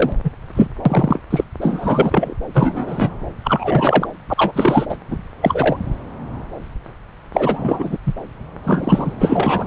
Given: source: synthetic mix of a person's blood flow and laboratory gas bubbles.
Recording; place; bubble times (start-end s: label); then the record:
Doppler ultrasound of blood flow; subclavian vein
0.00-0.12 s: bubbles
0.23-0.31 s: bubbles
0.55-0.68 s: bubbles
0.85-1.19 s: bubbles
1.30-1.44 s: bubbles
1.60-2.35 s: bubbles
2.54-3.15 s: bubbles
3.44-4.06 s: bubbles
4.29-4.34 s: bubbles
4.37-4.85 s: bubbles
4.89-4.97 s: bubbles
5.10-5.17 s: bubbles
5.41-5.77 s: bubbles
7.32-7.97 s: bubbles
8.06-8.13 s: bubbles
8.63-9.13 s: bubbles
9.21-9.67 s: bubbles
From the record:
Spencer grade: 3 (all of the cardiac periods contain showers or single bubble signals, but not dominating or overriding the cardiac motion signals); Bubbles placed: anywhere in the cardiac cycle